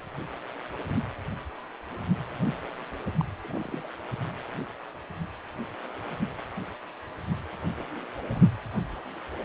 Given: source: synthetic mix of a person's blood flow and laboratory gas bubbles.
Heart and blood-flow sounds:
Doppler ultrasound of blood flow; precordium
3.21-3.25 s: bubbles
3.44-3.81 s: bubbles
3.84-3.87 s: bubbles
8.35-8.38 s: bubbles
From the record:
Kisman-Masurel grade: 121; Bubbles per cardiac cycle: 1 to 2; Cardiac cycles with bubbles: 10 to 50%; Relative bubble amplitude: barely perceptible (0.100 to 0.250); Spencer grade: 2 (many but less than half of the cardiac periods contain bubble signals, singularly or in groups); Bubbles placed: anywhere in the cardiac cycle

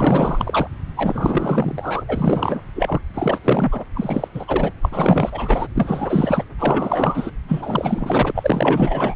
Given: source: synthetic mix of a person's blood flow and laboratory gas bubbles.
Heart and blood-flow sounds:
Doppler ultrasound of blood flow; subclavian vein
0.00-0.67 s: bubbles
0.96-2.03 s: bubbles
2.08-2.61 s: bubbles
2.75-3.01 s: bubbles
3.13-3.40 s: bubbles
3.44-3.85 s: bubbles
3.93-4.28 s: bubbles
4.34-4.72 s: bubbles
4.81-5.67 s: bubbles
5.75-6.43 s: bubbles
6.58-7.31 s: bubbles
7.48-8.32 s: bubbles
8.35-9.14 s: bubbles
From the record:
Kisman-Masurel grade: 444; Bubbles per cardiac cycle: continuous sound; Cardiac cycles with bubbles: 100%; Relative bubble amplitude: maximal (0.775 to 0.999); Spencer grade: 4 (maximum detectable bubble signal sounding continuously throughout systole and diastole of every cardiac period, and overriding the amplitude of the normal cardiac signals); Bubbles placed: anywhere in the cardiac cycle

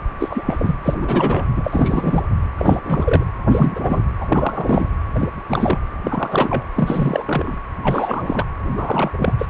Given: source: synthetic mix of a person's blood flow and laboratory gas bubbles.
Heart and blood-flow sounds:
Doppler ultrasound of blood flow; precordium
0.19-0.43 s: bubbles
0.45-0.76 s: bubbles
0.82-0.95 s: bubbles
1.01-1.47 s: bubbles
1.56-2.23 s: bubbles
2.58-2.79 s: bubbles
2.84-3.23 s: bubbles
3.46-4.02 s: bubbles
4.20-4.90 s: bubbles
5.15-5.29 s: bubbles
5.48-5.79 s: bubbles
6.04-6.64 s: bubbles
6.75-7.58 s: bubbles
7.82-8.46 s: bubbles
8.71-9.11 s: bubbles
9.18-9.33 s: bubbles
9.38-9.46 s: bubbles
From the record:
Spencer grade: 3 (all of the cardiac periods contain showers or single bubble signals, but not dominating or overriding the cardiac motion signals); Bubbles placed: anywhere in the cardiac cycle

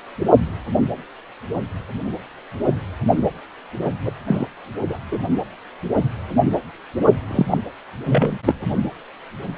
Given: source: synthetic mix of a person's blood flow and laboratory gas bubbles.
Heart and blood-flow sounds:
Doppler ultrasound of blood flow; precordium
4.05-4.12 s: bubbles
4.25-4.48 s: bubbles
4.89-4.98 s: bubbles
5.12-5.19 s: bubbles
7.28-7.46 s: bubbles
7.50-7.58 s: bubbles
8.07-8.38 s: bubbles
8.46-8.54 s: bubbles
From the record:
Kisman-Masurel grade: 223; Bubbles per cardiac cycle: several, 3 to 8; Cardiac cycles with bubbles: 10 to 50%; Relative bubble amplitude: loud (0.450 to 0.775); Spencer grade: 2 (many but less than half of the cardiac periods contain bubble signals, singularly or in groups); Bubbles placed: only in the low amplitude regions of the cardiac cycle

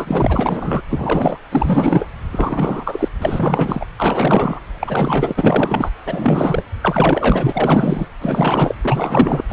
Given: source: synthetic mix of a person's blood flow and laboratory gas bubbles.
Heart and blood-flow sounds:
Doppler ultrasound of blood flow; subclavian vein
0.00-0.82 s: bubbles
0.89-1.39 s: bubbles
1.51-2.06 s: bubbles
2.31-3.08 s: bubbles
3.18-3.86 s: bubbles
3.97-4.59 s: bubbles
4.79-5.90 s: bubbles
6.05-6.62 s: bubbles
6.82-8.08 s: bubbles
8.21-8.74 s: bubbles
8.82-9.42 s: bubbles
9.48-9.53 s: bubbles
From the record:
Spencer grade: 4 (maximum detectable bubble signal sounding continuously throughout systole and diastole of every cardiac period, and overriding the amplitude of the normal cardiac signals); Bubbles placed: anywhere in the cardiac cycle

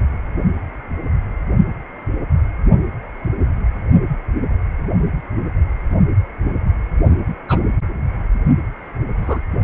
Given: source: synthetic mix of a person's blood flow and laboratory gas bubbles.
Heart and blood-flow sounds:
Doppler ultrasound of blood flow; precordium
7.49-7.59 s: bubbles
9.17-9.40 s: bubbles
From the record:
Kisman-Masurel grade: 122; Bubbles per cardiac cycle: 1 to 2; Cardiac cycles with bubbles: 10 to 50%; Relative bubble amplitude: moderate (0.250 to 0.450); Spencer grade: 2 (many but less than half of the cardiac periods contain bubble signals, singularly or in groups); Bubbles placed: only in the low amplitude regions of the cardiac cycle

